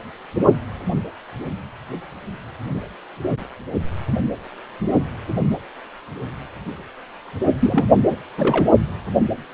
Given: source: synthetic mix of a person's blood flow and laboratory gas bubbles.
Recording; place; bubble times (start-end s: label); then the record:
Doppler ultrasound of blood flow; precordium
7.60-7.86 s: bubbles
7.91-7.99 s: bubbles
8.06-8.16 s: bubbles
8.37-8.71 s: bubbles
From the record:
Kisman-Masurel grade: 222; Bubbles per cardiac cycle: several, 3 to 8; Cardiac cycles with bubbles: 10 to 50%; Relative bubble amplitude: moderate (0.250 to 0.450); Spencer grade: 2 (many but less than half of the cardiac periods contain bubble signals, singularly or in groups); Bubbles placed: only in the low amplitude regions of the cardiac cycle